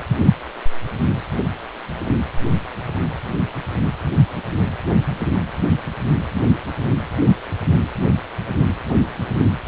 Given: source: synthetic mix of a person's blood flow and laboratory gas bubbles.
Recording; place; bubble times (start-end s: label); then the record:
Doppler ultrasound of blood flow; precordium
no bubbles
From the record:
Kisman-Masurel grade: 000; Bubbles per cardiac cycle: 0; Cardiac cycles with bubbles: 0%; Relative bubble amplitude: no bubbles discernible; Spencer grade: 0 (complete lack of bubble signals)